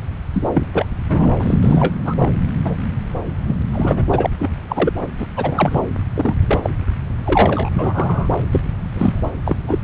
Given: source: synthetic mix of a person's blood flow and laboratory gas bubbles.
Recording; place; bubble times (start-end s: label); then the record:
Doppler ultrasound of blood flow; subclavian vein
0.33-0.49 s: bubbles
0.53-0.67 s: bubbles
0.73-0.85 s: bubbles
1.08-1.28 s: bubbles
1.39-1.95 s: bubbles
2.05-2.16 s: bubbles
2.18-2.37 s: bubbles
2.64-2.77 s: bubbles
3.46-3.56 s: bubbles
3.60-3.62 s: bubbles
3.72-4.04 s: bubbles
4.09-4.30 s: bubbles
4.39-4.50 s: bubbles
4.69-4.93 s: bubbles
5.01-5.06 s: bubbles
5.18-5.27 s: bubbles
5.36-5.82 s: bubbles
6.15-6.70 s: bubbles
7.25-7.70 s: bubbles
7.73-8.29 s: bubbles
8.51-8.61 s: bubbles
8.93-9.32 s: bubbles
9.46-9.56 s: bubbles
9.67-9.79 s: bubbles
From the record:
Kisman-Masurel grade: 243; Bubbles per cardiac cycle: several, 3 to 8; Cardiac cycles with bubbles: 100%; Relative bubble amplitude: loud (0.450 to 0.775); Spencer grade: 3 (all of the cardiac periods contain showers or single bubble signals, but not dominating or overriding the cardiac motion signals); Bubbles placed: anywhere in the cardiac cycle